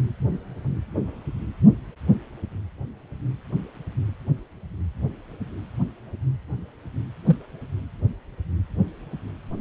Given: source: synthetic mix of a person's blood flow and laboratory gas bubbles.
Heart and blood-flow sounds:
Doppler ultrasound of blood flow; precordium
7.26-7.37 s: bubbles
From the record:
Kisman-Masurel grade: 112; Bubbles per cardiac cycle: 1 to 2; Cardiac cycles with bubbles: 1 to 10%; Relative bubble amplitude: moderate (0.250 to 0.450); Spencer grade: 1 (occasional bubble signal discernible with the cardiac motion signal, with majority of cardiac periods free of bubbles); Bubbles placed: anywhere in the cardiac cycle

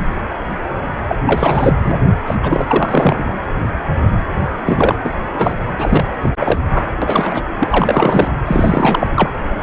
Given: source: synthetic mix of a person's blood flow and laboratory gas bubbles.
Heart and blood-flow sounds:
Doppler ultrasound of blood flow; precordium
1.08-1.16 s: bubbles
1.26-1.73 s: bubbles
1.84-1.99 s: bubbles
2.26-2.35 s: bubbles
2.43-3.36 s: bubbles
4.66-4.96 s: bubbles
5.03-5.14 s: bubbles
5.38-5.55 s: bubbles
5.78-6.04 s: bubbles
6.21-6.29 s: bubbles
6.40-6.58 s: bubbles
6.74-6.85 s: bubbles
7.01-7.42 s: bubbles
7.60-8.33 s: bubbles
8.46-9.07 s: bubbles
9.15-9.30 s: bubbles
From the record:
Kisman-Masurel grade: 333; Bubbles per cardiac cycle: rolling drumbeat, 9 or more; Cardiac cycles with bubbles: 50 to 99%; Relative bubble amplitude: loud (0.450 to 0.775); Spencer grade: 3 (all of the cardiac periods contain showers or single bubble signals, but not dominating or overriding the cardiac motion signals); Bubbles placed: anywhere in the cardiac cycle

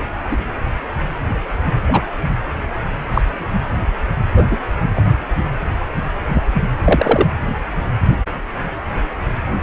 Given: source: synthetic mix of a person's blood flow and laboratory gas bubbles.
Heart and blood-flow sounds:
Doppler ultrasound of blood flow; precordium
0.30-0.36 s: bubbles
1.88-2.02 s: bubbles
3.14-3.21 s: bubbles
4.35-4.46 s: bubbles
4.50-4.57 s: bubbles
4.95-5.02 s: bubbles
6.28-6.43 s: bubbles
6.85-7.27 s: bubbles
From the record:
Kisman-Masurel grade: 123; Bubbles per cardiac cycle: 1 to 2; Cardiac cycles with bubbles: 10 to 50%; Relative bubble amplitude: loud (0.450 to 0.775); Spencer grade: 2 (many but less than half of the cardiac periods contain bubble signals, singularly or in groups); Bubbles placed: anywhere in the cardiac cycle

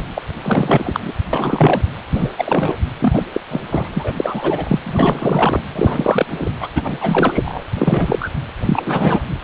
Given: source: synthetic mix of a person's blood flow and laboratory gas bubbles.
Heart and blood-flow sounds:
Doppler ultrasound of blood flow; precordium
0.15-0.22 s: bubbles
0.42-1.12 s: bubbles
1.32-1.81 s: bubbles
2.14-2.31 s: bubbles
2.38-2.77 s: bubbles
2.99-3.23 s: bubbles
3.33-3.41 s: bubbles
3.51-3.60 s: bubbles
3.71-3.90 s: bubbles
3.94-4.14 s: bubbles
4.17-4.79 s: bubbles
4.83-5.60 s: bubbles
5.75-6.25 s: bubbles
6.29-6.49 s: bubbles
6.59-6.68 s: bubbles
6.75-7.64 s: bubbles
7.74-8.31 s: bubbles
8.59-9.23 s: bubbles
From the record:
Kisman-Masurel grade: 343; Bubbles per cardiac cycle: rolling drumbeat, 9 or more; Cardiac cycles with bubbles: 100%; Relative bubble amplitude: loud (0.450 to 0.775); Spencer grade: 3 (all of the cardiac periods contain showers or single bubble signals, but not dominating or overriding the cardiac motion signals); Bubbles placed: anywhere in the cardiac cycle

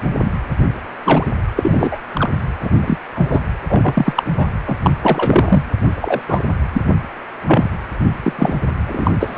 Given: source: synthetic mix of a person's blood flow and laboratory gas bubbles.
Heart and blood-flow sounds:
Doppler ultrasound of blood flow; precordium
0.24-0.30 s: bubbles
1.04-1.27 s: bubbles
1.56-1.97 s: bubbles
2.13-2.29 s: bubbles
2.61-2.70 s: bubbles
2.80-2.97 s: bubbles
3.15-3.42 s: bubbles
3.69-4.23 s: bubbles
4.37-4.46 s: bubbles
4.66-4.77 s: bubbles
4.83-4.91 s: bubbles
5.02-5.62 s: bubbles
5.95-6.21 s: bubbles
6.26-6.43 s: bubbles
6.73-6.81 s: bubbles
7.46-7.70 s: bubbles
8.22-8.33 s: bubbles
8.38-8.54 s: bubbles
8.87-9.11 s: bubbles
9.20-9.37 s: bubbles
From the record:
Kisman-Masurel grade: 243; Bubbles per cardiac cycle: several, 3 to 8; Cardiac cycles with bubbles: 100%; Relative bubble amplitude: loud (0.450 to 0.775); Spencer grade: 3 (all of the cardiac periods contain showers or single bubble signals, but not dominating or overriding the cardiac motion signals); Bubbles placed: anywhere in the cardiac cycle

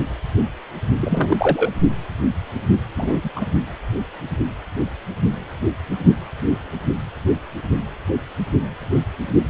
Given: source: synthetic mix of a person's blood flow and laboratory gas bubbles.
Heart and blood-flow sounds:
Doppler ultrasound of blood flow; precordium
1.00-1.71 s: bubbles
2.97-3.19 s: bubbles
3.23-3.29 s: bubbles
3.35-3.46 s: bubbles
From the record:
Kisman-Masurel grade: 222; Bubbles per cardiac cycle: several, 3 to 8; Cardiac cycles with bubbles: 10 to 50%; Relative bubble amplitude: moderate (0.250 to 0.450); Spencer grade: 2 (many but less than half of the cardiac periods contain bubble signals, singularly or in groups); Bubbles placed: only in the low amplitude regions of the cardiac cycle

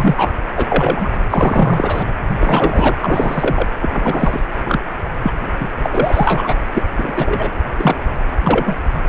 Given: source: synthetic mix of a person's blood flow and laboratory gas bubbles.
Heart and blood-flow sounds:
Doppler ultrasound of blood flow; precordium
0.00-0.32 s: bubbles
0.56-1.09 s: bubbles
1.30-2.04 s: bubbles
2.40-2.96 s: bubbles
3.01-3.68 s: bubbles
3.80-4.41 s: bubbles
4.65-4.81 s: bubbles
5.23-5.32 s: bubbles
5.61-5.67 s: bubbles
5.82-6.55 s: bubbles
6.73-6.83 s: bubbles
6.97-7.12 s: bubbles
7.16-7.51 s: bubbles
7.77-8.00 s: bubbles
8.43-8.75 s: bubbles
From the record:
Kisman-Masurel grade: 243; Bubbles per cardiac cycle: several, 3 to 8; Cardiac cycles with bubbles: 100%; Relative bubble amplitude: loud (0.450 to 0.775); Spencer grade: 3 (all of the cardiac periods contain showers or single bubble signals, but not dominating or overriding the cardiac motion signals); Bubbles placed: anywhere in the cardiac cycle

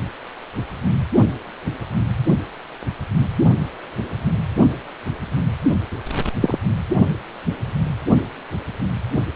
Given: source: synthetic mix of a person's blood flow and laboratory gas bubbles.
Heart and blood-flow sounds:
Doppler ultrasound of blood flow; precordium
6.40-6.58 s: bubbles
From the record:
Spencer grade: 1 (occasional bubble signal discernible with the cardiac motion signal, with majority of cardiac periods free of bubbles); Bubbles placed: only in the low amplitude regions of the cardiac cycle

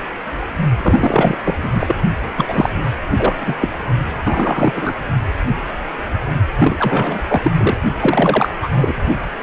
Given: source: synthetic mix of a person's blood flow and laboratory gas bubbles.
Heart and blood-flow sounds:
Doppler ultrasound of blood flow; precordium
0.77-1.37 s: bubbles
1.44-1.54 s: bubbles
1.62-1.96 s: bubbles
2.37-2.69 s: bubbles
3.17-3.54 s: bubbles
3.60-3.69 s: bubbles
4.25-4.73 s: bubbles
4.76-4.93 s: bubbles
6.58-7.21 s: bubbles
7.28-7.51 s: bubbles
7.57-7.77 s: bubbles
7.99-8.51 s: bubbles
8.62-8.95 s: bubbles
From the record:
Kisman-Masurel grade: 333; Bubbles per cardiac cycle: rolling drumbeat, 9 or more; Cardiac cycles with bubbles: 50 to 99%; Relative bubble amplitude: loud (0.450 to 0.775); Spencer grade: 3 (all of the cardiac periods contain showers or single bubble signals, but not dominating or overriding the cardiac motion signals); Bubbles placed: only in the low amplitude regions of the cardiac cycle

